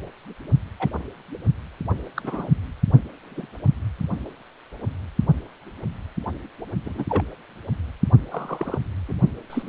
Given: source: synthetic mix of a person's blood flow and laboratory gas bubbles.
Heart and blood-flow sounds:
Doppler ultrasound of blood flow; precordium
0.79-0.89 s: bubbles
2.16-2.48 s: bubbles
3.22-3.54 s: bubbles
6.84-7.04 s: bubbles
7.09-7.23 s: bubbles
8.31-8.78 s: bubbles
9.09-9.13 s: bubbles
9.50-9.69 s: bubbles
From the record:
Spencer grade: 2 (many but less than half of the cardiac periods contain bubble signals, singularly or in groups); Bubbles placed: only in the low amplitude regions of the cardiac cycle

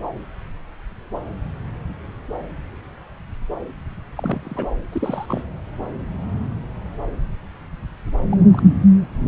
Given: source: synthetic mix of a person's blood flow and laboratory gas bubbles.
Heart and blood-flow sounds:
Doppler ultrasound of blood flow; subclavian vein
4.17-4.67 s: bubbles
4.92-5.44 s: bubbles
8.31-8.37 s: bubbles
8.40-8.46 s: bubbles
8.53-8.62 s: bubbles
From the record:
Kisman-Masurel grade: 221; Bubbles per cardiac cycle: several, 3 to 8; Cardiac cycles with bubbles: 10 to 50%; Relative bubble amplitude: barely perceptible (0.100 to 0.250); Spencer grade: 2 (many but less than half of the cardiac periods contain bubble signals, singularly or in groups); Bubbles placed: anywhere in the cardiac cycle

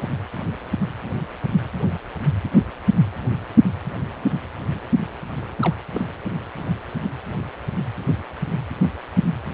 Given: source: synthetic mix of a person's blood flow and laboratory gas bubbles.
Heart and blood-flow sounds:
Doppler ultrasound of blood flow; precordium
1.82-1.97 s: bubbles
5.61-5.74 s: bubbles
5.94-6.05 s: bubbles
From the record:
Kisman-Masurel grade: 121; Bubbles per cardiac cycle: 1 to 2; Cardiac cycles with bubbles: 10 to 50%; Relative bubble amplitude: barely perceptible (0.100 to 0.250); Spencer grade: 2 (many but less than half of the cardiac periods contain bubble signals, singularly or in groups); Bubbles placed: anywhere in the cardiac cycle

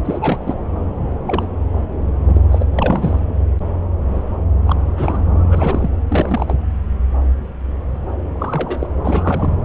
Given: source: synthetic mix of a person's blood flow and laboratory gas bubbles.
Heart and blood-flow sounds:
Doppler ultrasound of blood flow; subclavian vein
0.05-0.57 s: bubbles
1.25-1.48 s: bubbles
2.27-2.44 s: bubbles
2.50-2.65 s: bubbles
2.75-3.19 s: bubbles
4.67-4.76 s: bubbles
4.96-5.23 s: bubbles
5.50-5.97 s: bubbles
6.08-6.56 s: bubbles
8.39-8.87 s: bubbles
9.04-9.54 s: bubbles
From the record:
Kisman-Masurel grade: 232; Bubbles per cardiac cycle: several, 3 to 8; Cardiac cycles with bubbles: 50 to 99%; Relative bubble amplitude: moderate (0.250 to 0.450); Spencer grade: 3 (all of the cardiac periods contain showers or single bubble signals, but not dominating or overriding the cardiac motion signals); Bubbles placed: anywhere in the cardiac cycle

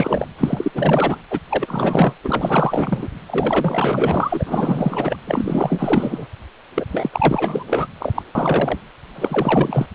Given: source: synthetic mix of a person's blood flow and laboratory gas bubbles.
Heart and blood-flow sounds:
Doppler ultrasound of blood flow; precordium
0.00-0.28 s: bubbles
0.39-0.71 s: bubbles
0.74-1.18 s: bubbles
1.30-1.39 s: bubbles
1.49-2.14 s: bubbles
2.23-3.08 s: bubbles
3.27-5.16 s: bubbles
5.27-6.27 s: bubbles
6.75-6.85 s: bubbles
6.92-7.09 s: bubbles
7.12-7.64 s: bubbles
7.67-7.88 s: bubbles
8.00-8.23 s: bubbles
8.35-8.79 s: bubbles
9.15-9.87 s: bubbles
From the record:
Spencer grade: 4 (maximum detectable bubble signal sounding continuously throughout systole and diastole of every cardiac period, and overriding the amplitude of the normal cardiac signals); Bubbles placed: anywhere in the cardiac cycle

